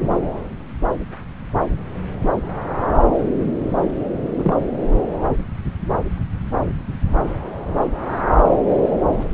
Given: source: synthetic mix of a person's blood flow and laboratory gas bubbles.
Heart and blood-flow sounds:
Doppler ultrasound of blood flow; subclavian vein
4.38-4.56 s: bubbles
From the record:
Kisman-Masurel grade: 112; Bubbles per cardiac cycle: 1 to 2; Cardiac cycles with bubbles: 1 to 10%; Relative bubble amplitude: moderate (0.250 to 0.450); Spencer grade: 1 (occasional bubble signal discernible with the cardiac motion signal, with majority of cardiac periods free of bubbles); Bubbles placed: anywhere in the cardiac cycle

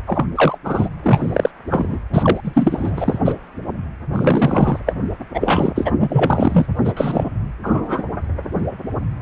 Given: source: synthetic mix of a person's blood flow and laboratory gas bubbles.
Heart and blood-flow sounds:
Doppler ultrasound of blood flow; precordium
0.07-0.26 s: bubbles
0.35-0.58 s: bubbles
0.64-0.89 s: bubbles
1.02-1.51 s: bubbles
1.70-1.98 s: bubbles
2.13-2.40 s: bubbles
2.44-3.19 s: bubbles
3.25-3.34 s: bubbles
4.13-4.80 s: bubbles
4.86-4.93 s: bubbles
5.34-5.71 s: bubbles
5.75-5.92 s: bubbles
6.00-6.66 s: bubbles
6.84-6.93 s: bubbles
6.96-7.29 s: bubbles
7.63-8.04 s: bubbles
From the record:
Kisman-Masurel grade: 233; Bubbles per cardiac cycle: several, 3 to 8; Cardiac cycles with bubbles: 50 to 99%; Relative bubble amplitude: loud (0.450 to 0.775); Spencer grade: 3 (all of the cardiac periods contain showers or single bubble signals, but not dominating or overriding the cardiac motion signals); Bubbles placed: anywhere in the cardiac cycle

